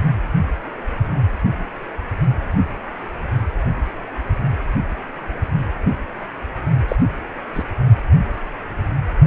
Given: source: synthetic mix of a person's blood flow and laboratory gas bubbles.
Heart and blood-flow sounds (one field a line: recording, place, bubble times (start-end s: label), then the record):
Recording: Doppler ultrasound of blood flow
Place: precordium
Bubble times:
6.88-6.96 s: bubbles
7.54-7.63 s: bubbles
From the record:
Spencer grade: 1 (occasional bubble signal discernible with the cardiac motion signal, with majority of cardiac periods free of bubbles)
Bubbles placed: only in the low amplitude regions of the cardiac cycle